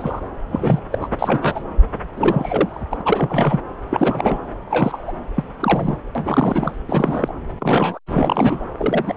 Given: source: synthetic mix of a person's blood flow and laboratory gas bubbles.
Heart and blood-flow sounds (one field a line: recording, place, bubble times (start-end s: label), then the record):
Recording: Doppler ultrasound of blood flow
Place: subclavian vein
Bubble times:
0.00-0.20 s: bubbles
0.49-0.80 s: bubbles
0.91-0.98 s: bubbles
1.01-1.08 s: bubbles
1.19-1.64 s: bubbles
2.16-2.83 s: bubbles
2.91-3.02 s: bubbles
3.05-3.60 s: bubbles
3.90-4.40 s: bubbles
4.70-5.12 s: bubbles
5.34-5.44 s: bubbles
5.59-5.96 s: bubbles
6.15-6.71 s: bubbles
6.88-7.33 s: bubbles
7.60-7.99 s: bubbles
8.07-8.59 s: bubbles
8.79-9.13 s: bubbles
From the record:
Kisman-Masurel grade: 242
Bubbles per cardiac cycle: several, 3 to 8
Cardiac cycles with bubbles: 100%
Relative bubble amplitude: moderate (0.250 to 0.450)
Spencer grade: 3 (all of the cardiac periods contain showers or single bubble signals, but not dominating or overriding the cardiac motion signals)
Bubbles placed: anywhere in the cardiac cycle